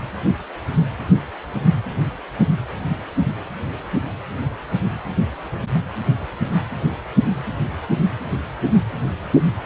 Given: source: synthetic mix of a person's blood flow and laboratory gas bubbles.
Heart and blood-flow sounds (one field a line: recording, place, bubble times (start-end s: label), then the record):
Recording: Doppler ultrasound of blood flow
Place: precordium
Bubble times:
no bubbles
From the record:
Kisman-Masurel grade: 000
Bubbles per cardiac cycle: 0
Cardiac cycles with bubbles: 0%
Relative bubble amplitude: no bubbles discernible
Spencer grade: 0 (complete lack of bubble signals)